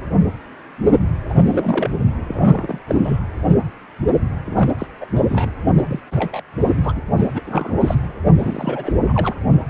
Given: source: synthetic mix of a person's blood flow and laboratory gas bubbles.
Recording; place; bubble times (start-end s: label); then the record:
Doppler ultrasound of blood flow; precordium
1.28-1.90 s: bubbles
2.28-2.79 s: bubbles
2.87-3.20 s: bubbles
4.44-4.74 s: bubbles
4.78-4.87 s: bubbles
5.00-5.06 s: bubbles
5.15-5.22 s: bubbles
5.29-5.50 s: bubbles
5.77-6.00 s: bubbles
6.11-6.42 s: bubbles
6.62-6.71 s: bubbles
6.83-6.92 s: bubbles
6.96-7.01 s: bubbles
7.18-7.29 s: bubbles
7.33-7.42 s: bubbles
7.46-7.95 s: bubbles
8.35-8.92 s: bubbles
9.05-9.34 s: bubbles
From the record:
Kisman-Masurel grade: 332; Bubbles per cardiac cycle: rolling drumbeat, 9 or more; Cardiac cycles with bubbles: 50 to 99%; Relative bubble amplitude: moderate (0.250 to 0.450); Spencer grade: 3 (all of the cardiac periods contain showers or single bubble signals, but not dominating or overriding the cardiac motion signals); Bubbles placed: anywhere in the cardiac cycle